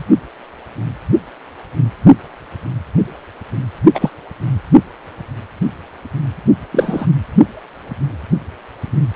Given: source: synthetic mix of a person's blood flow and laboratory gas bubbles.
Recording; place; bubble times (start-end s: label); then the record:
Doppler ultrasound of blood flow; precordium
3.95-4.10 s: bubbles
6.72-7.06 s: bubbles
From the record:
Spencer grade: 2 (many but less than half of the cardiac periods contain bubble signals, singularly or in groups); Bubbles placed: only in the low amplitude regions of the cardiac cycle